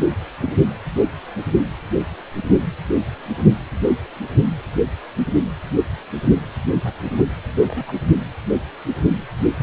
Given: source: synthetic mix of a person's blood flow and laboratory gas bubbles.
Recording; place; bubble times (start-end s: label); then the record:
Doppler ultrasound of blood flow; precordium
0.43-0.52 s: bubbles
6.84-6.93 s: bubbles
7.18-7.24 s: bubbles
7.62-7.66 s: bubbles
7.69-7.92 s: bubbles
9.59-9.63 s: bubbles
From the record:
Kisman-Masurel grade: 121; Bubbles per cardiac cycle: 1 to 2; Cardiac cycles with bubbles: 10 to 50%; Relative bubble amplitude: barely perceptible (0.100 to 0.250); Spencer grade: 2 (many but less than half of the cardiac periods contain bubble signals, singularly or in groups); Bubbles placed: anywhere in the cardiac cycle